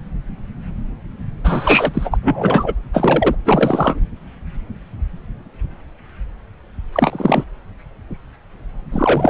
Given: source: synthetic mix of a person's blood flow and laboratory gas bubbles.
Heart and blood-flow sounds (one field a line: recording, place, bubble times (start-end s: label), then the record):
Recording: Doppler ultrasound of blood flow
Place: subclavian vein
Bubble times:
1.44-2.17 s: bubbles
2.23-2.75 s: bubbles
2.92-3.35 s: bubbles
3.46-4.00 s: bubbles
6.93-7.44 s: bubbles
8.91-9.30 s: bubbles
From the record:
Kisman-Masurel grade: 223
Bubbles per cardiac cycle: several, 3 to 8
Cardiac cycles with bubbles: 10 to 50%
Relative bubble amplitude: loud (0.450 to 0.775)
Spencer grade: 2 (many but less than half of the cardiac periods contain bubble signals, singularly or in groups)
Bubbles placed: anywhere in the cardiac cycle